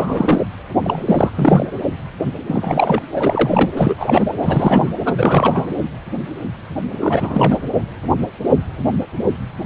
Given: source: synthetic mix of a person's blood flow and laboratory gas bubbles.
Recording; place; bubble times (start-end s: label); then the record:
Doppler ultrasound of blood flow; precordium
0.00-0.41 s: bubbles
0.83-1.30 s: bubbles
1.35-1.66 s: bubbles
2.46-3.01 s: bubbles
3.12-3.71 s: bubbles
3.76-3.95 s: bubbles
3.97-4.25 s: bubbles
4.28-4.34 s: bubbles
4.42-4.94 s: bubbles
5.05-5.13 s: bubbles
5.17-5.66 s: bubbles
7.00-7.59 s: bubbles
From the record:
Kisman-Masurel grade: 333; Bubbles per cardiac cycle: rolling drumbeat, 9 or more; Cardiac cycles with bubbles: 50 to 99%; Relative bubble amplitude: loud (0.450 to 0.775); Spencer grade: 3 (all of the cardiac periods contain showers or single bubble signals, but not dominating or overriding the cardiac motion signals); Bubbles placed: anywhere in the cardiac cycle